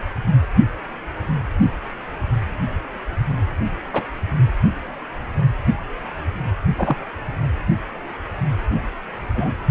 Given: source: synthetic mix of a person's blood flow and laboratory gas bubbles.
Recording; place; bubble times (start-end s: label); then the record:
Doppler ultrasound of blood flow; precordium
3.92-4.03 s: bubbles
6.78-6.96 s: bubbles
9.35-9.53 s: bubbles
From the record:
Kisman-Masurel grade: 123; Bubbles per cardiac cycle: 1 to 2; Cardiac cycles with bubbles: 10 to 50%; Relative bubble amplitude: loud (0.450 to 0.775); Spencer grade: 2 (many but less than half of the cardiac periods contain bubble signals, singularly or in groups); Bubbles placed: anywhere in the cardiac cycle